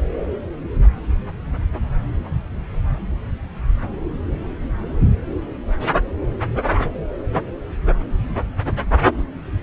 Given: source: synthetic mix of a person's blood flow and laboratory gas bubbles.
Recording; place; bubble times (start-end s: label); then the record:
Doppler ultrasound of blood flow; subclavian vein
9.18-9.23 s: bubbles
From the record:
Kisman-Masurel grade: 111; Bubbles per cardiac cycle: 1 to 2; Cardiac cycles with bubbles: 1 to 10%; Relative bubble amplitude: barely perceptible (0.100 to 0.250); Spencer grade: 1 (occasional bubble signal discernible with the cardiac motion signal, with majority of cardiac periods free of bubbles); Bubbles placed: anywhere in the cardiac cycle